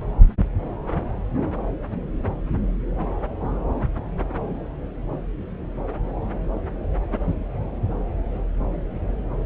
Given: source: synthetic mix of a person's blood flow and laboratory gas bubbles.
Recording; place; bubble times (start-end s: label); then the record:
Doppler ultrasound of blood flow; subclavian vein
no bubbles
From the record:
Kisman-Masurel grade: 000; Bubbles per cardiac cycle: 0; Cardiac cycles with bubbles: 0%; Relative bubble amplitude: no bubbles discernible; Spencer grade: 0 (complete lack of bubble signals)